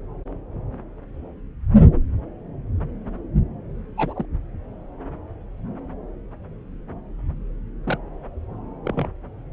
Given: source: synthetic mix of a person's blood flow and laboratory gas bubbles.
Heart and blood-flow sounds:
Doppler ultrasound of blood flow; subclavian vein
3.97-4.26 s: bubbles
7.84-7.98 s: bubbles
8.84-9.07 s: bubbles
From the record:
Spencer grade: 2 (many but less than half of the cardiac periods contain bubble signals, singularly or in groups); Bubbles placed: anywhere in the cardiac cycle

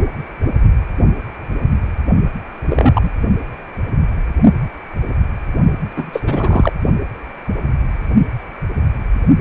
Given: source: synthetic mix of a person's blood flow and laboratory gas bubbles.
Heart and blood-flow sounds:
Doppler ultrasound of blood flow; precordium
2.68-3.10 s: bubbles
5.96-6.72 s: bubbles
From the record:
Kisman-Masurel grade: 223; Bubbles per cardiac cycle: several, 3 to 8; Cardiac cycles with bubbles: 10 to 50%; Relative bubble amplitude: loud (0.450 to 0.775); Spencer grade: 2 (many but less than half of the cardiac periods contain bubble signals, singularly or in groups); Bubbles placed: only in the low amplitude regions of the cardiac cycle

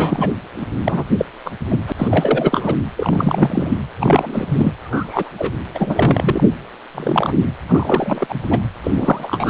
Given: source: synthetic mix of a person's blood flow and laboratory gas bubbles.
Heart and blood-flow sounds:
Doppler ultrasound of blood flow; precordium
0.00-0.30 s: bubbles
0.57-0.66 s: bubbles
0.84-1.04 s: bubbles
1.17-1.25 s: bubbles
1.45-1.51 s: bubbles
1.70-1.83 s: bubbles
1.87-1.92 s: bubbles
1.98-2.08 s: bubbles
2.10-2.75 s: bubbles
2.96-3.77 s: bubbles
3.98-4.72 s: bubbles
4.81-5.30 s: bubbles
5.38-5.52 s: bubbles
5.74-6.44 s: bubbles
6.95-7.32 s: bubbles
7.68-8.35 s: bubbles
8.50-8.61 s: bubbles
8.83-8.91 s: bubbles
8.95-9.50 s: bubbles
From the record:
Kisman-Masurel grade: 243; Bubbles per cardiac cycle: several, 3 to 8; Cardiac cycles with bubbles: 100%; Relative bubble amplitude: loud (0.450 to 0.775); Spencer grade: 3 (all of the cardiac periods contain showers or single bubble signals, but not dominating or overriding the cardiac motion signals); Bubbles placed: anywhere in the cardiac cycle

